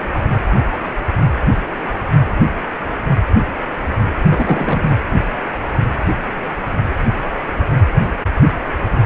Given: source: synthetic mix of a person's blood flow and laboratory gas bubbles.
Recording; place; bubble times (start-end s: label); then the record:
Doppler ultrasound of blood flow; precordium
4.29-4.96 s: bubbles
From the record:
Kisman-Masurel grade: 212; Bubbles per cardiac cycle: several, 3 to 8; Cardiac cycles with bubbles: 1 to 10%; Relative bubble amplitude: moderate (0.250 to 0.450); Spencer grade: 1 (occasional bubble signal discernible with the cardiac motion signal, with majority of cardiac periods free of bubbles); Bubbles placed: anywhere in the cardiac cycle